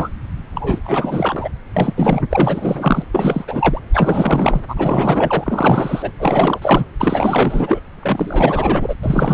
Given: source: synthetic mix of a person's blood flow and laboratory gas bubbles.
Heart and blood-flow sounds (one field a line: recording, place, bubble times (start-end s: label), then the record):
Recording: Doppler ultrasound of blood flow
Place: subclavian vein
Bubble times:
0.00-0.09 s: bubbles
0.55-0.78 s: bubbles
0.84-1.49 s: bubbles
1.76-2.22 s: bubbles
2.30-3.04 s: bubbles
3.12-3.45 s: bubbles
3.47-3.81 s: bubbles
3.93-4.61 s: bubbles
4.68-6.11 s: bubbles
6.16-6.59 s: bubbles
6.61-6.86 s: bubbles
6.97-7.80 s: bubbles
8.01-8.95 s: bubbles
9.03-9.33 s: bubbles
From the record:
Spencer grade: 4 (maximum detectable bubble signal sounding continuously throughout systole and diastole of every cardiac period, and overriding the amplitude of the normal cardiac signals)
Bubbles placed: anywhere in the cardiac cycle